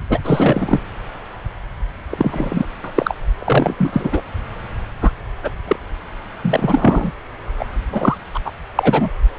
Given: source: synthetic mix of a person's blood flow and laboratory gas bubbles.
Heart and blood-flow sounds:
Doppler ultrasound of blood flow; subclavian vein
0.09-0.20 s: bubbles
0.24-0.80 s: bubbles
2.09-2.67 s: bubbles
2.84-2.91 s: bubbles
2.94-3.15 s: bubbles
3.39-3.74 s: bubbles
3.77-4.21 s: bubbles
5.01-5.12 s: bubbles
5.42-5.51 s: bubbles
5.67-5.76 s: bubbles
6.42-7.12 s: bubbles
7.58-7.65 s: bubbles
7.92-8.17 s: bubbles
8.34-8.39 s: bubbles
8.45-8.52 s: bubbles
8.75-9.10 s: bubbles
From the record:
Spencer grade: 3 (all of the cardiac periods contain showers or single bubble signals, but not dominating or overriding the cardiac motion signals); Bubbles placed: anywhere in the cardiac cycle

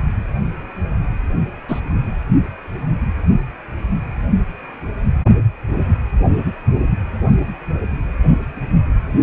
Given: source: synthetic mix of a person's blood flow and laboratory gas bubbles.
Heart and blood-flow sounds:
Doppler ultrasound of blood flow; precordium
1.68-1.81 s: bubbles
From the record:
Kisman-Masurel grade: 113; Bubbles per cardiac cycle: 1 to 2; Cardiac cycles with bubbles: 1 to 10%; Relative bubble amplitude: loud (0.450 to 0.775); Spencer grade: 1 (occasional bubble signal discernible with the cardiac motion signal, with majority of cardiac periods free of bubbles); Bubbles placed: anywhere in the cardiac cycle

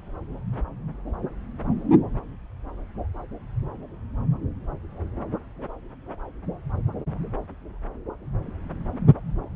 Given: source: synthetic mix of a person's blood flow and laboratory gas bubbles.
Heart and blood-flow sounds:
Doppler ultrasound of blood flow; subclavian vein
no bubbles
From the record:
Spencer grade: 0 (complete lack of bubble signals)

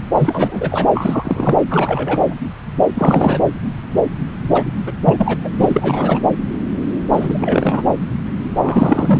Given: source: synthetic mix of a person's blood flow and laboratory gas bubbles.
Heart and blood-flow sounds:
Doppler ultrasound of blood flow; subclavian vein
0.18-0.86 s: bubbles
0.94-1.63 s: bubbles
1.70-2.34 s: bubbles
2.95-3.38 s: bubbles
4.50-4.66 s: bubbles
4.87-4.92 s: bubbles
5.04-5.36 s: bubbles
5.44-5.49 s: bubbles
5.58-6.20 s: bubbles
7.13-7.83 s: bubbles
8.56-9.20 s: bubbles
From the record:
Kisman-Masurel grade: 333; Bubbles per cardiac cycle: rolling drumbeat, 9 or more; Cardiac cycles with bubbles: 50 to 99%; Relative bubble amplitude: loud (0.450 to 0.775); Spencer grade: 3 (all of the cardiac periods contain showers or single bubble signals, but not dominating or overriding the cardiac motion signals); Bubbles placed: anywhere in the cardiac cycle

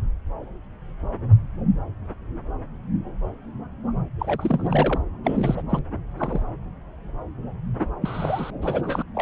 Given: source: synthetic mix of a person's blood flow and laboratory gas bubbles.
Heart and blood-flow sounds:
Doppler ultrasound of blood flow; subclavian vein
4.19-5.01 s: bubbles
5.24-5.62 s: bubbles
5.69-5.79 s: bubbles
6.18-6.42 s: bubbles
7.79-7.85 s: bubbles
8.01-8.51 s: bubbles
8.62-9.03 s: bubbles
9.15-9.22 s: bubbles
From the record:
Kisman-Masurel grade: 332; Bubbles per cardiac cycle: rolling drumbeat, 9 or more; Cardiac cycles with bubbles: 50 to 99%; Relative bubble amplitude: moderate (0.250 to 0.450); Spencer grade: 3 (all of the cardiac periods contain showers or single bubble signals, but not dominating or overriding the cardiac motion signals); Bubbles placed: anywhere in the cardiac cycle

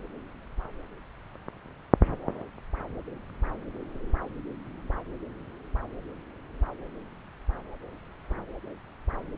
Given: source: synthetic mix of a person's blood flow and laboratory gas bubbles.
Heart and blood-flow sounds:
Doppler ultrasound of blood flow; subclavian vein
no bubbles
From the record:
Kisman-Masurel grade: 000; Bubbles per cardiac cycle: 0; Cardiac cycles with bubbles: 0%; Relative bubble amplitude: no bubbles discernible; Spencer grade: 0 (complete lack of bubble signals)

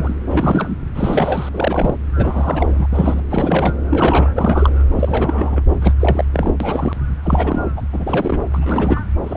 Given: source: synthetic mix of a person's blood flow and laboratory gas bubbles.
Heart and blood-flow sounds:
Doppler ultrasound of blood flow; subclavian vein
0.00-0.14 s: bubbles
0.30-0.75 s: bubbles
0.95-1.49 s: bubbles
1.52-1.96 s: bubbles
2.16-2.87 s: bubbles
2.93-3.21 s: bubbles
3.30-3.73 s: bubbles
3.90-4.29 s: bubbles
4.35-4.70 s: bubbles
4.96-5.61 s: bubbles
5.81-5.93 s: bubbles
6.00-6.25 s: bubbles
6.33-6.52 s: bubbles
6.60-6.96 s: bubbles
7.23-7.70 s: bubbles
7.76-7.81 s: bubbles
7.92-8.45 s: bubbles
8.53-9.00 s: bubbles
9.24-9.37 s: bubbles
From the record:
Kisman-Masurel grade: 342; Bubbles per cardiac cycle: rolling drumbeat, 9 or more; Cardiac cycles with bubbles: 100%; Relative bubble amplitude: moderate (0.250 to 0.450); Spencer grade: 3 (all of the cardiac periods contain showers or single bubble signals, but not dominating or overriding the cardiac motion signals); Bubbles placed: anywhere in the cardiac cycle

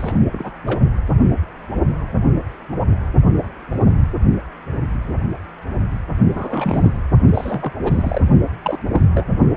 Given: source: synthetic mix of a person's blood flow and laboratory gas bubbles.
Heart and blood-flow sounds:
Doppler ultrasound of blood flow; precordium
0.00-0.23 s: bubbles
0.31-0.52 s: bubbles
0.66-0.80 s: bubbles
6.35-7.00 s: bubbles
7.33-7.73 s: bubbles
7.83-8.21 s: bubbles
8.62-8.79 s: bubbles
8.93-9.04 s: bubbles
9.12-9.26 s: bubbles
From the record:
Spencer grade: 2 (many but less than half of the cardiac periods contain bubble signals, singularly or in groups); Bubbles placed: only in the low amplitude regions of the cardiac cycle

